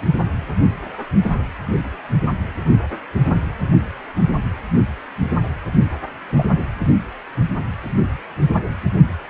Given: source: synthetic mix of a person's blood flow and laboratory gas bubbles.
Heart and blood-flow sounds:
Doppler ultrasound of blood flow; precordium
6.38-6.43 s: bubbles
From the record:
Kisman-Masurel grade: 113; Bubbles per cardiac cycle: 1 to 2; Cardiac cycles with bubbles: 1 to 10%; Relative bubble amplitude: loud (0.450 to 0.775); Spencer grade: 1 (occasional bubble signal discernible with the cardiac motion signal, with majority of cardiac periods free of bubbles); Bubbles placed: anywhere in the cardiac cycle

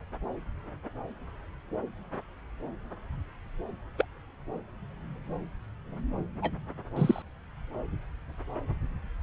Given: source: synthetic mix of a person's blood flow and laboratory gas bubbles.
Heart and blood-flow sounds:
Doppler ultrasound of blood flow; subclavian vein
3.98-4.05 s: bubbles
6.42-6.50 s: bubbles
6.96-7.23 s: bubbles
From the record:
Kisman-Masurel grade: 121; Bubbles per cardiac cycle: 1 to 2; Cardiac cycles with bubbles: 10 to 50%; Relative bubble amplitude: barely perceptible (0.100 to 0.250); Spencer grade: 2 (many but less than half of the cardiac periods contain bubble signals, singularly or in groups); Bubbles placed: anywhere in the cardiac cycle

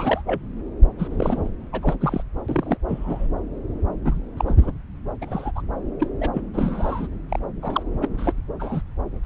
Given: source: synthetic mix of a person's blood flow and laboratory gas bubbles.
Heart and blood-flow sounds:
Doppler ultrasound of blood flow; subclavian vein
0.00-0.22 s: bubbles
0.26-0.40 s: bubbles
0.99-1.50 s: bubbles
1.72-1.95 s: bubbles
2.00-2.22 s: bubbles
2.48-2.77 s: bubbles
2.88-3.27 s: bubbles
4.04-4.20 s: bubbles
4.37-4.71 s: bubbles
5.21-5.51 s: bubbles
5.55-5.62 s: bubbles
6.00-6.09 s: bubbles
6.21-6.29 s: bubbles
6.33-6.42 s: bubbles
6.54-7.07 s: bubbles
7.29-7.39 s: bubbles
7.62-7.83 s: bubbles
8.01-8.06 s: bubbles
8.18-8.33 s: bubbles
8.59-8.81 s: bubbles
9.23-9.26 s: bubbles
From the record:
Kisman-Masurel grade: 242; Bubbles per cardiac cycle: several, 3 to 8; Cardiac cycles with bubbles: 100%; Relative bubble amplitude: moderate (0.250 to 0.450); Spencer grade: 3 (all of the cardiac periods contain showers or single bubble signals, but not dominating or overriding the cardiac motion signals); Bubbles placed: anywhere in the cardiac cycle

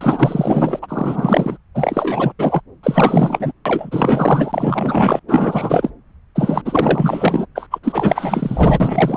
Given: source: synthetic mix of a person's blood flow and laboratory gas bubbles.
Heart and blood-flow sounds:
Doppler ultrasound of blood flow; subclavian vein
0.01-0.79 s: bubbles
0.82-1.57 s: bubbles
1.74-2.33 s: bubbles
2.38-2.61 s: bubbles
2.83-3.52 s: bubbles
3.65-5.20 s: bubbles
5.27-5.90 s: bubbles
6.35-6.62 s: bubbles
6.65-7.46 s: bubbles
7.55-7.66 s: bubbles
7.71-7.79 s: bubbles
7.83-9.17 s: bubbles
From the record:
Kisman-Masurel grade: 444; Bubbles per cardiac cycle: continuous sound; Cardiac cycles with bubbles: 100%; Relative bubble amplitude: maximal (0.775 to 0.999); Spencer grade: 4 (maximum detectable bubble signal sounding continuously throughout systole and diastole of every cardiac period, and overriding the amplitude of the normal cardiac signals); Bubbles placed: anywhere in the cardiac cycle

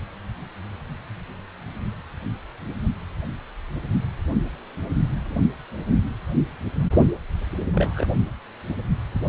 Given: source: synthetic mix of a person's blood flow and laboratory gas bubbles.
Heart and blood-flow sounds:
Doppler ultrasound of blood flow; precordium
7.72-8.06 s: bubbles
From the record:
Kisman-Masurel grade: 112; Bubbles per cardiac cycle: 1 to 2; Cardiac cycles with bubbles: 1 to 10%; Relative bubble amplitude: moderate (0.250 to 0.450); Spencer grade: 1 (occasional bubble signal discernible with the cardiac motion signal, with majority of cardiac periods free of bubbles); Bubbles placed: only in the low amplitude regions of the cardiac cycle

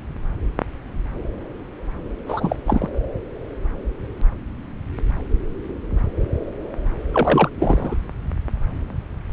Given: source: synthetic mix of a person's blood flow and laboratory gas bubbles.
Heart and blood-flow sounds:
Doppler ultrasound of blood flow; subclavian vein
2.25-2.56 s: bubbles
2.65-2.88 s: bubbles
7.12-7.49 s: bubbles
7.59-7.95 s: bubbles
From the record:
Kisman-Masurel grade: 222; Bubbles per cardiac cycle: several, 3 to 8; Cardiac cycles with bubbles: 10 to 50%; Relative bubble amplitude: moderate (0.250 to 0.450); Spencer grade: 2 (many but less than half of the cardiac periods contain bubble signals, singularly or in groups); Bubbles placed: anywhere in the cardiac cycle

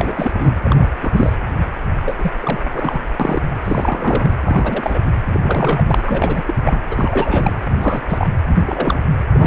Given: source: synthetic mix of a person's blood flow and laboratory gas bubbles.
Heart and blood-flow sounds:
Doppler ultrasound of blood flow; precordium
0.00-0.33 s: bubbles
0.38-0.52 s: bubbles
0.64-0.87 s: bubbles
1.00-1.32 s: bubbles
2.05-2.14 s: bubbles
2.18-2.31 s: bubbles
2.41-2.60 s: bubbles
2.73-3.01 s: bubbles
3.20-3.43 s: bubbles
3.64-4.34 s: bubbles
4.43-5.00 s: bubbles
5.26-6.04 s: bubbles
6.06-6.43 s: bubbles
6.47-6.55 s: bubbles
6.64-6.80 s: bubbles
6.90-7.55 s: bubbles
7.68-8.00 s: bubbles
8.08-8.27 s: bubbles
8.54-9.03 s: bubbles
9.34-9.47 s: bubbles
From the record:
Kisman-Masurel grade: 342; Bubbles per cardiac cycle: rolling drumbeat, 9 or more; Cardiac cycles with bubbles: 100%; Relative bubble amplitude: moderate (0.250 to 0.450); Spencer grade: 3 (all of the cardiac periods contain showers or single bubble signals, but not dominating or overriding the cardiac motion signals); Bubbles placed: anywhere in the cardiac cycle

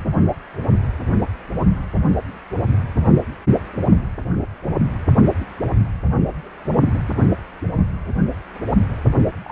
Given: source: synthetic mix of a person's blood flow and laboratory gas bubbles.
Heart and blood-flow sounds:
Doppler ultrasound of blood flow; precordium
9.46-9.52 s: bubbles
From the record:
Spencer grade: 1 (occasional bubble signal discernible with the cardiac motion signal, with majority of cardiac periods free of bubbles); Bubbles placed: anywhere in the cardiac cycle

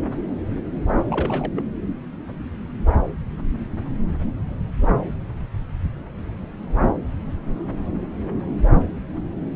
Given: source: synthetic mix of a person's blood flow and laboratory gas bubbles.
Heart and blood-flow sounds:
Doppler ultrasound of blood flow; subclavian vein
1.09-1.63 s: bubbles
From the record:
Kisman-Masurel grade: 211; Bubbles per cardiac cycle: several, 3 to 8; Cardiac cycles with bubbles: 1 to 10%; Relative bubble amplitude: barely perceptible (0.100 to 0.250); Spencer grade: 1 (occasional bubble signal discernible with the cardiac motion signal, with majority of cardiac periods free of bubbles); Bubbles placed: anywhere in the cardiac cycle

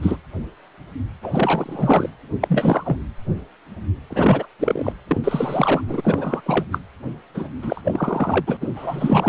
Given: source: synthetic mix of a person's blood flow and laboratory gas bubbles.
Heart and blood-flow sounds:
Doppler ultrasound of blood flow; precordium
0.01-0.17 s: bubbles
1.23-2.10 s: bubbles
2.41-2.98 s: bubbles
4.10-4.46 s: bubbles
4.59-4.92 s: bubbles
5.07-5.20 s: bubbles
5.23-5.82 s: bubbles
5.88-6.41 s: bubbles
6.45-6.64 s: bubbles
6.72-6.78 s: bubbles
7.34-7.49 s: bubbles
7.62-7.81 s: bubbles
7.84-8.57 s: bubbles
8.61-8.67 s: bubbles
8.75-9.28 s: bubbles
From the record:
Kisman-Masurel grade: 332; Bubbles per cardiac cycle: rolling drumbeat, 9 or more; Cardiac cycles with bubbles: 50 to 99%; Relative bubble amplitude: moderate (0.250 to 0.450); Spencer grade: 3 (all of the cardiac periods contain showers or single bubble signals, but not dominating or overriding the cardiac motion signals); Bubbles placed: anywhere in the cardiac cycle

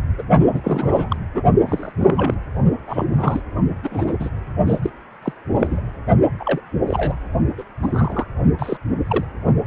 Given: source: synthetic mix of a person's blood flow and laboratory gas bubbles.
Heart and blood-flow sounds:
Doppler ultrasound of blood flow; precordium
0.18-0.22 s: bubbles
0.53-1.16 s: bubbles
1.34-1.43 s: bubbles
1.69-1.92 s: bubbles
1.97-2.38 s: bubbles
2.87-3.05 s: bubbles
3.12-3.41 s: bubbles
3.83-4.17 s: bubbles
4.19-4.29 s: bubbles
4.67-4.79 s: bubbles
4.82-4.90 s: bubbles
5.22-5.33 s: bubbles
5.54-5.80 s: bubbles
6.39-6.60 s: bubbles
6.87-7.14 s: bubbles
7.58-7.63 s: bubbles
7.82-8.27 s: bubbles
8.59-8.77 s: bubbles
9.08-9.25 s: bubbles
From the record:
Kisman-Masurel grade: 242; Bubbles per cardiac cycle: several, 3 to 8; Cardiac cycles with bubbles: 100%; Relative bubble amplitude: moderate (0.250 to 0.450); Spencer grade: 3 (all of the cardiac periods contain showers or single bubble signals, but not dominating or overriding the cardiac motion signals); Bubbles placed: only in the low amplitude regions of the cardiac cycle

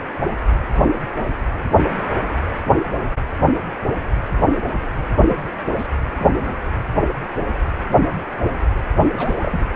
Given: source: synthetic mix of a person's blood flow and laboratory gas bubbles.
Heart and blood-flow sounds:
Doppler ultrasound of blood flow; precordium
5.17-5.52 s: bubbles
5.79-5.88 s: bubbles
6.18-6.34 s: bubbles
9.16-9.66 s: bubbles
From the record:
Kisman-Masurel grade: 221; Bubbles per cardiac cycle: several, 3 to 8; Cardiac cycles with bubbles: 10 to 50%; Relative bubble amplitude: barely perceptible (0.100 to 0.250); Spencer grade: 2 (many but less than half of the cardiac periods contain bubble signals, singularly or in groups); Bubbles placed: anywhere in the cardiac cycle

